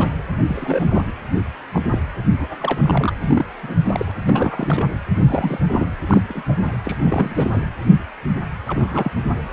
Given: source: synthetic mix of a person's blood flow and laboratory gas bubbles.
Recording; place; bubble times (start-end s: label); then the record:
Doppler ultrasound of blood flow; precordium
0.00-0.16 s: bubbles
0.48-1.11 s: bubbles
1.73-1.82 s: bubbles
1.90-1.99 s: bubbles
2.40-2.47 s: bubbles
2.58-3.13 s: bubbles
3.27-3.46 s: bubbles
3.62-3.75 s: bubbles
3.85-4.11 s: bubbles
4.25-4.87 s: bubbles
5.14-5.23 s: bubbles
5.26-5.60 s: bubbles
5.69-5.88 s: bubbles
6.08-6.22 s: bubbles
6.28-6.43 s: bubbles
6.49-6.56 s: bubbles
6.63-6.77 s: bubbles
6.84-6.96 s: bubbles
7.00-7.63 s: bubbles
8.67-9.12 s: bubbles
From the record:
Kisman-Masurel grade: 232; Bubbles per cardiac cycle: several, 3 to 8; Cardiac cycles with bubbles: 50 to 99%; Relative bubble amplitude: moderate (0.250 to 0.450); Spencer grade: 3 (all of the cardiac periods contain showers or single bubble signals, but not dominating or overriding the cardiac motion signals); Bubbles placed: anywhere in the cardiac cycle